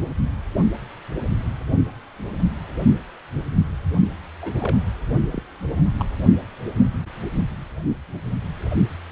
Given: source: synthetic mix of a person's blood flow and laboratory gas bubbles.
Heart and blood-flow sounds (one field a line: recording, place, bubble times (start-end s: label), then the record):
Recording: Doppler ultrasound of blood flow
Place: precordium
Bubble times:
4.42-4.78 s: bubbles
5.30-5.43 s: bubbles
5.78-5.83 s: bubbles
5.99-6.05 s: bubbles
From the record:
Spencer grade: 2 (many but less than half of the cardiac periods contain bubble signals, singularly or in groups)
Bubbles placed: only in the low amplitude regions of the cardiac cycle